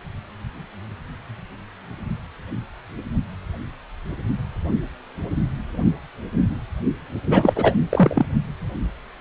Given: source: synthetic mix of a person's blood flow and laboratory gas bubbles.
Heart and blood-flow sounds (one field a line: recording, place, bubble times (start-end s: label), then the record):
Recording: Doppler ultrasound of blood flow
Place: precordium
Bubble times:
7.26-7.53 s: bubbles
7.55-7.77 s: bubbles
7.89-8.26 s: bubbles
From the record:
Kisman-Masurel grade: 213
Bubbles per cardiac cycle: several, 3 to 8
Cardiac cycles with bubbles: 1 to 10%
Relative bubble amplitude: loud (0.450 to 0.775)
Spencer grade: 1 (occasional bubble signal discernible with the cardiac motion signal, with majority of cardiac periods free of bubbles)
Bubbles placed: only in the low amplitude regions of the cardiac cycle